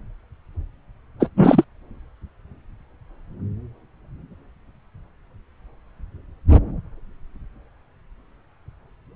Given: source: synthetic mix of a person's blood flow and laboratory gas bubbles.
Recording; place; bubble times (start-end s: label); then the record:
Doppler ultrasound of blood flow; subclavian vein
1.19-1.28 s: bubbles
1.37-1.64 s: bubbles
From the record:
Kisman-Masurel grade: 213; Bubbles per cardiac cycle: several, 3 to 8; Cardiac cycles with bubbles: 1 to 10%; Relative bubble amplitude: loud (0.450 to 0.775); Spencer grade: 1 (occasional bubble signal discernible with the cardiac motion signal, with majority of cardiac periods free of bubbles); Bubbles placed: anywhere in the cardiac cycle